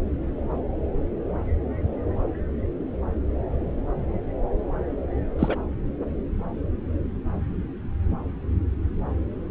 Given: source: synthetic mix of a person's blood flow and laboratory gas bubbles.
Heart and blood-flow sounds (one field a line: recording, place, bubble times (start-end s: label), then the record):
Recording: Doppler ultrasound of blood flow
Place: subclavian vein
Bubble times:
5.39-5.55 s: bubbles
From the record:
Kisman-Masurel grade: 112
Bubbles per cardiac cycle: 1 to 2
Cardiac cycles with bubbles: 1 to 10%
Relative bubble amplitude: moderate (0.250 to 0.450)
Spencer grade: 1 (occasional bubble signal discernible with the cardiac motion signal, with majority of cardiac periods free of bubbles)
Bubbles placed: anywhere in the cardiac cycle